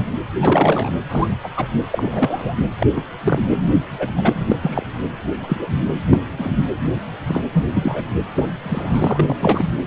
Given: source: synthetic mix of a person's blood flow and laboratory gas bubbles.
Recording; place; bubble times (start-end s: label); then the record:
Doppler ultrasound of blood flow; precordium
0.42-0.93 s: bubbles
1.09-1.28 s: bubbles
1.43-1.48 s: bubbles
1.56-1.67 s: bubbles
1.90-2.54 s: bubbles
2.80-2.86 s: bubbles
2.94-3.02 s: bubbles
3.21-3.43 s: bubbles
3.98-4.11 s: bubbles
4.16-4.56 s: bubbles
4.62-4.83 s: bubbles
5.43-5.67 s: bubbles
6.09-6.19 s: bubbles
6.39-6.51 s: bubbles
7.27-7.42 s: bubbles
7.52-7.66 s: bubbles
7.74-8.04 s: bubbles
8.35-8.49 s: bubbles
8.63-9.37 s: bubbles
9.39-9.65 s: bubbles
9.78-9.83 s: bubbles
From the record:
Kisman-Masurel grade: 242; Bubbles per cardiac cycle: several, 3 to 8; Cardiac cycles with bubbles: 100%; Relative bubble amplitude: moderate (0.250 to 0.450); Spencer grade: 3 (all of the cardiac periods contain showers or single bubble signals, but not dominating or overriding the cardiac motion signals); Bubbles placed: anywhere in the cardiac cycle